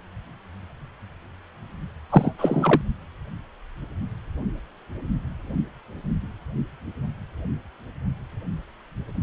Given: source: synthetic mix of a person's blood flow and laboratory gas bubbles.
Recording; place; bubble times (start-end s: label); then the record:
Doppler ultrasound of blood flow; precordium
2.10-2.33 s: bubbles
2.38-2.81 s: bubbles
From the record:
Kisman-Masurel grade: 223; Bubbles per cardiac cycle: several, 3 to 8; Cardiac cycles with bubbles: 10 to 50%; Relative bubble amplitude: loud (0.450 to 0.775); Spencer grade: 2 (many but less than half of the cardiac periods contain bubble signals, singularly or in groups); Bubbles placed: only in the low amplitude regions of the cardiac cycle